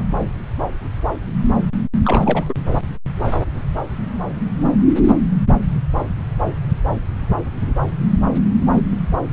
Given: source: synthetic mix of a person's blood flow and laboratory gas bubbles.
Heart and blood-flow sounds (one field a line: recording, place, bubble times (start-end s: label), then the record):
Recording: Doppler ultrasound of blood flow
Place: subclavian vein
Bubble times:
2.04-2.53 s: bubbles
From the record:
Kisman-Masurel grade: 213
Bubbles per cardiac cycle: several, 3 to 8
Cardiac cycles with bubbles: 1 to 10%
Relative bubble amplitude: loud (0.450 to 0.775)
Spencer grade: 1 (occasional bubble signal discernible with the cardiac motion signal, with majority of cardiac periods free of bubbles)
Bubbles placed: anywhere in the cardiac cycle